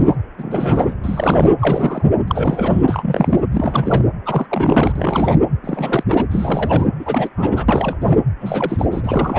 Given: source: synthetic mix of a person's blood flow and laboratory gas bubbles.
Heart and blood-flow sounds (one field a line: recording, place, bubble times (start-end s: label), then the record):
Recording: Doppler ultrasound of blood flow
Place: precordium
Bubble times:
0.00-0.16 s: bubbles
0.38-0.94 s: bubbles
1.03-1.53 s: bubbles
1.58-2.11 s: bubbles
2.27-3.40 s: bubbles
3.52-4.03 s: bubbles
4.25-4.46 s: bubbles
4.50-4.92 s: bubbles
4.95-5.41 s: bubbles
5.63-6.04 s: bubbles
6.08-6.26 s: bubbles
6.29-6.87 s: bubbles
6.99-7.29 s: bubbles
7.37-7.65 s: bubbles
7.68-7.97 s: bubbles
8.01-8.19 s: bubbles
8.41-8.88 s: bubbles
8.91-9.39 s: bubbles
From the record:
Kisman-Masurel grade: 342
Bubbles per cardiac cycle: rolling drumbeat, 9 or more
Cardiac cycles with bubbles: 100%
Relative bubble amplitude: moderate (0.250 to 0.450)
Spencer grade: 3 (all of the cardiac periods contain showers or single bubble signals, but not dominating or overriding the cardiac motion signals)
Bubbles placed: anywhere in the cardiac cycle